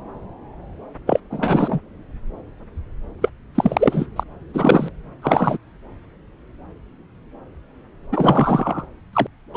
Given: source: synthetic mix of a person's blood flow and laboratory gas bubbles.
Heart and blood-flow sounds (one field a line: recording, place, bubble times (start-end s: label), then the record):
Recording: Doppler ultrasound of blood flow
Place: subclavian vein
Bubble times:
1.07-1.20 s: bubbles
1.30-1.79 s: bubbles
3.21-3.29 s: bubbles
3.55-4.06 s: bubbles
4.16-4.23 s: bubbles
4.54-4.88 s: bubbles
5.22-5.57 s: bubbles
8.12-8.86 s: bubbles
9.13-9.27 s: bubbles
9.54-9.57 s: bubbles
From the record:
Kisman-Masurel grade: 233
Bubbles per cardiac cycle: several, 3 to 8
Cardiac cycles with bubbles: 50 to 99%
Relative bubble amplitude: loud (0.450 to 0.775)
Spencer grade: 3 (all of the cardiac periods contain showers or single bubble signals, but not dominating or overriding the cardiac motion signals)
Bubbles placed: anywhere in the cardiac cycle